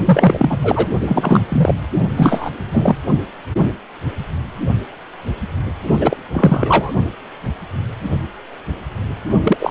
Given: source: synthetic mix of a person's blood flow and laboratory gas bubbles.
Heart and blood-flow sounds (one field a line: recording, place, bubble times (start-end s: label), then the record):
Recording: Doppler ultrasound of blood flow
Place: precordium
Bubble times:
0.00-0.58 s: bubbles
0.63-0.88 s: bubbles
0.99-1.46 s: bubbles
1.48-1.74 s: bubbles
2.17-2.50 s: bubbles
2.71-2.96 s: bubbles
6.00-6.17 s: bubbles
6.33-6.93 s: bubbles
9.43-9.71 s: bubbles
From the record:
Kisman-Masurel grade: 333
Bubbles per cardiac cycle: rolling drumbeat, 9 or more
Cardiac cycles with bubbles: 50 to 99%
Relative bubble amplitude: loud (0.450 to 0.775)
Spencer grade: 3 (all of the cardiac periods contain showers or single bubble signals, but not dominating or overriding the cardiac motion signals)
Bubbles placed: only in the low amplitude regions of the cardiac cycle